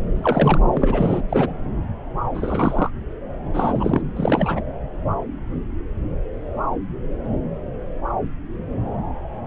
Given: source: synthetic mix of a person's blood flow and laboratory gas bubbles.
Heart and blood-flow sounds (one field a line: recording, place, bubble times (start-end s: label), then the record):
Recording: Doppler ultrasound of blood flow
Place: subclavian vein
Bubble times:
0.15-0.59 s: bubbles
0.73-1.21 s: bubbles
1.29-1.52 s: bubbles
2.34-2.91 s: bubbles
3.54-4.02 s: bubbles
4.16-4.60 s: bubbles
From the record:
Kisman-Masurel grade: 233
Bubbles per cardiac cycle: several, 3 to 8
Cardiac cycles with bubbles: 50 to 99%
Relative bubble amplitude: loud (0.450 to 0.775)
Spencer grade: 3 (all of the cardiac periods contain showers or single bubble signals, but not dominating or overriding the cardiac motion signals)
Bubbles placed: anywhere in the cardiac cycle